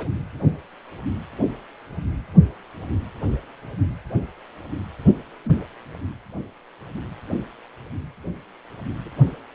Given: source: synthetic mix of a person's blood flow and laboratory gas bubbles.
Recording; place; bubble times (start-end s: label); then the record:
Doppler ultrasound of blood flow; precordium
0.00-0.09 s: bubbles
5.45-5.59 s: bubbles
9.03-9.44 s: bubbles
From the record:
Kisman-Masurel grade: 121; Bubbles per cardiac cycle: 1 to 2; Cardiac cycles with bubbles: 10 to 50%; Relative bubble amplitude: barely perceptible (0.100 to 0.250); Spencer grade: 2 (many but less than half of the cardiac periods contain bubble signals, singularly or in groups); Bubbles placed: anywhere in the cardiac cycle